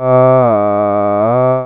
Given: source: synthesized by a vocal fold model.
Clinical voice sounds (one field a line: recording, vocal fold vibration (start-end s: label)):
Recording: sustained vowel that changes in the middle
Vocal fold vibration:
0.00-0.38 s: 128.1 Hz, open quotient 0.55
0.58-1.18 s: 102.9 Hz, open quotient 0.27
1.38-1.66 s: 128.1 Hz, open quotient 0.55